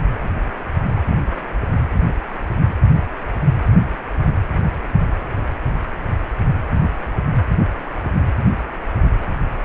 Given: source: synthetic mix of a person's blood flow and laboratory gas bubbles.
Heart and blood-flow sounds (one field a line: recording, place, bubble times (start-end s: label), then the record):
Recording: Doppler ultrasound of blood flow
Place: precordium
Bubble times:
no bubbles
From the record:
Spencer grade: 0 (complete lack of bubble signals)